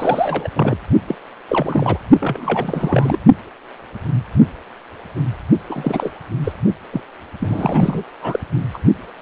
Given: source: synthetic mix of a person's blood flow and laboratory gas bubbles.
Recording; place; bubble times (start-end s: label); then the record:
Doppler ultrasound of blood flow; precordium
0.00-0.48 s: bubbles
0.53-0.77 s: bubbles
1.07-1.16 s: bubbles
1.48-1.98 s: bubbles
2.20-3.17 s: bubbles
5.70-6.12 s: bubbles
6.44-6.52 s: bubbles
6.92-7.02 s: bubbles
7.40-8.04 s: bubbles
8.22-8.39 s: bubbles
8.73-8.79 s: bubbles
From the record:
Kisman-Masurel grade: 332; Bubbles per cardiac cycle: rolling drumbeat, 9 or more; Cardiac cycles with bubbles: 50 to 99%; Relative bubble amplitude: moderate (0.250 to 0.450); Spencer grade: 3 (all of the cardiac periods contain showers or single bubble signals, but not dominating or overriding the cardiac motion signals); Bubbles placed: only in the low amplitude regions of the cardiac cycle